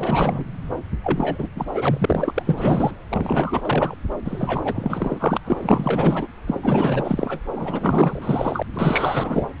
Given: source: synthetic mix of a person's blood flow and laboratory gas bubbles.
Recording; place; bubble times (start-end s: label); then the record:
Doppler ultrasound of blood flow; subclavian vein
0.00-0.44 s: bubbles
1.03-1.48 s: bubbles
1.55-2.43 s: bubbles
2.46-2.91 s: bubbles
3.09-3.96 s: bubbles
4.25-5.38 s: bubbles
5.44-6.27 s: bubbles
6.46-7.40 s: bubbles
7.54-8.62 s: bubbles
8.74-9.53 s: bubbles
From the record:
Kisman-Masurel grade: 444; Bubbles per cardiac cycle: continuous sound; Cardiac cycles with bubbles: 100%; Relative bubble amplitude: maximal (0.775 to 0.999); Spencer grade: 4 (maximum detectable bubble signal sounding continuously throughout systole and diastole of every cardiac period, and overriding the amplitude of the normal cardiac signals); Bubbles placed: anywhere in the cardiac cycle